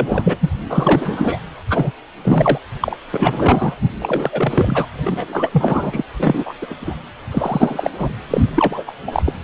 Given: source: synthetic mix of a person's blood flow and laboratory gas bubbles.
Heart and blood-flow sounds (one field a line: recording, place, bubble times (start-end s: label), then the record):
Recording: Doppler ultrasound of blood flow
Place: precordium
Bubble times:
0.00-0.36 s: bubbles
0.40-0.49 s: bubbles
0.70-1.42 s: bubbles
1.69-1.91 s: bubbles
2.24-2.59 s: bubbles
2.80-2.97 s: bubbles
3.11-3.76 s: bubbles
4.00-4.87 s: bubbles
5.04-6.03 s: bubbles
6.18-6.54 s: bubbles
6.61-6.67 s: bubbles
6.69-6.75 s: bubbles
6.80-6.94 s: bubbles
7.31-8.12 s: bubbles
8.30-8.50 s: bubbles
8.54-8.84 s: bubbles
8.87-8.92 s: bubbles
9.06-9.32 s: bubbles
From the record:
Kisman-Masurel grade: 343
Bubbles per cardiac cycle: rolling drumbeat, 9 or more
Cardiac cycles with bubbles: 100%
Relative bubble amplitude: loud (0.450 to 0.775)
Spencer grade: 3 (all of the cardiac periods contain showers or single bubble signals, but not dominating or overriding the cardiac motion signals)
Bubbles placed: anywhere in the cardiac cycle